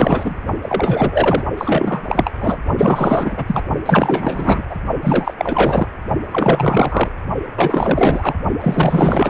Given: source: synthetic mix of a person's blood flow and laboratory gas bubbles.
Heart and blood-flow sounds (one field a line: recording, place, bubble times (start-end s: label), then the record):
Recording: Doppler ultrasound of blood flow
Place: precordium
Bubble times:
0.00-0.44 s: bubbles
0.61-1.43 s: bubbles
1.57-2.04 s: bubbles
2.08-2.33 s: bubbles
2.40-2.57 s: bubbles
2.77-3.44 s: bubbles
3.47-3.61 s: bubbles
3.85-4.63 s: bubbles
4.68-4.76 s: bubbles
5.03-5.33 s: bubbles
5.38-5.88 s: bubbles
6.31-7.09 s: bubbles
7.56-8.34 s: bubbles
8.61-9.30 s: bubbles
From the record:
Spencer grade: 4 (maximum detectable bubble signal sounding continuously throughout systole and diastole of every cardiac period, and overriding the amplitude of the normal cardiac signals)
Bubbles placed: only in the low amplitude regions of the cardiac cycle